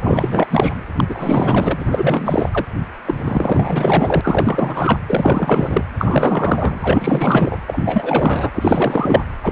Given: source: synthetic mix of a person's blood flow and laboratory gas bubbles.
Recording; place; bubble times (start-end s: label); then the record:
Doppler ultrasound of blood flow; precordium
0.02-0.47 s: bubbles
0.51-0.75 s: bubbles
0.97-1.04 s: bubbles
1.08-2.65 s: bubbles
3.06-3.14 s: bubbles
3.17-4.21 s: bubbles
4.24-5.00 s: bubbles
5.07-5.82 s: bubbles
5.98-7.58 s: bubbles
7.67-8.51 s: bubbles
8.54-9.24 s: bubbles
9.43-9.52 s: bubbles
From the record:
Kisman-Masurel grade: 444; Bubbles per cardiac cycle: continuous sound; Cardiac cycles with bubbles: 100%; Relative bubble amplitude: maximal (0.775 to 0.999); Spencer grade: 4 (maximum detectable bubble signal sounding continuously throughout systole and diastole of every cardiac period, and overriding the amplitude of the normal cardiac signals); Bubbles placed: anywhere in the cardiac cycle